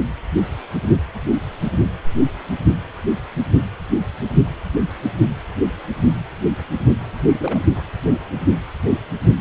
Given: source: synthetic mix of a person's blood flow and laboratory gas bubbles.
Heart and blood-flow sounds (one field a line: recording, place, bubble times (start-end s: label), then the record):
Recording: Doppler ultrasound of blood flow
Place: precordium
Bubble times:
7.20-7.63 s: bubbles
7.74-7.83 s: bubbles
From the record:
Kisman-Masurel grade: 211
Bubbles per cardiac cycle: several, 3 to 8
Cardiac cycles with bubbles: 1 to 10%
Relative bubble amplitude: barely perceptible (0.100 to 0.250)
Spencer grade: 1 (occasional bubble signal discernible with the cardiac motion signal, with majority of cardiac periods free of bubbles)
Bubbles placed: only in the low amplitude regions of the cardiac cycle